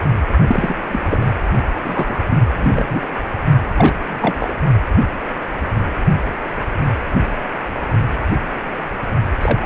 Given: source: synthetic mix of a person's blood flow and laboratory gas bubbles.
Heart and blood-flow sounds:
Doppler ultrasound of blood flow; precordium
0.47-0.77 s: bubbles
0.91-1.25 s: bubbles
1.83-2.27 s: bubbles
2.30-2.38 s: bubbles
2.56-2.84 s: bubbles
2.88-3.07 s: bubbles
3.77-3.94 s: bubbles
4.08-4.59 s: bubbles
9.41-9.58 s: bubbles
9.62-9.65 s: bubbles
From the record:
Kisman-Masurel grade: 223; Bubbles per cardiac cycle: several, 3 to 8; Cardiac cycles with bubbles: 10 to 50%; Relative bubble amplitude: loud (0.450 to 0.775); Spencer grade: 2 (many but less than half of the cardiac periods contain bubble signals, singularly or in groups); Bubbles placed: only in the low amplitude regions of the cardiac cycle

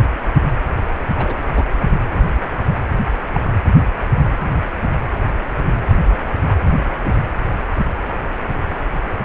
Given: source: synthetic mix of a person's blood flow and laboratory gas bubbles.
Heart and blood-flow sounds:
Doppler ultrasound of blood flow; precordium
1.17-1.35 s: bubbles
1.55-1.64 s: bubbles
3.34-3.40 s: bubbles
7.04-7.12 s: bubbles
From the record:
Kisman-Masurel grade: 122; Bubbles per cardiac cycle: 1 to 2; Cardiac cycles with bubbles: 10 to 50%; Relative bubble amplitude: moderate (0.250 to 0.450); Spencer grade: 2 (many but less than half of the cardiac periods contain bubble signals, singularly or in groups); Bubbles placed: anywhere in the cardiac cycle

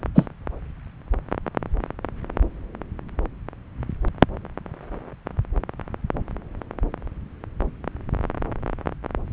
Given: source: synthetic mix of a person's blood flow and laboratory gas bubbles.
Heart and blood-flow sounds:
Doppler ultrasound of blood flow; subclavian vein
0.15-0.27 s: bubbles
From the record:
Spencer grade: 2 (many but less than half of the cardiac periods contain bubble signals, singularly or in groups); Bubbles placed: anywhere in the cardiac cycle

